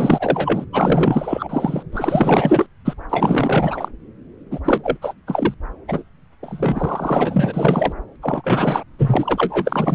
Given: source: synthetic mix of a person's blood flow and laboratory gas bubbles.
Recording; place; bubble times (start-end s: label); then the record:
Doppler ultrasound of blood flow; subclavian vein
0.00-0.65 s: bubbles
0.72-1.83 s: bubbles
1.92-2.66 s: bubbles
2.84-2.94 s: bubbles
3.09-3.88 s: bubbles
4.50-4.59 s: bubbles
4.64-4.97 s: bubbles
5.01-5.14 s: bubbles
5.26-5.54 s: bubbles
5.88-6.04 s: bubbles
6.42-7.92 s: bubbles
8.22-8.84 s: bubbles
8.99-9.95 s: bubbles
From the record:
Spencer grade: 4 (maximum detectable bubble signal sounding continuously throughout systole and diastole of every cardiac period, and overriding the amplitude of the normal cardiac signals); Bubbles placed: anywhere in the cardiac cycle